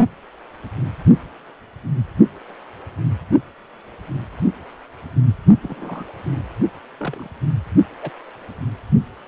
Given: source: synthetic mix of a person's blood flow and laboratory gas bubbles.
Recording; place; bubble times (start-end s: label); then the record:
Doppler ultrasound of blood flow; precordium
5.63-6.04 s: bubbles
6.99-7.28 s: bubbles
8.02-8.10 s: bubbles
From the record:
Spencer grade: 2 (many but less than half of the cardiac periods contain bubble signals, singularly or in groups); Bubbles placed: only in the low amplitude regions of the cardiac cycle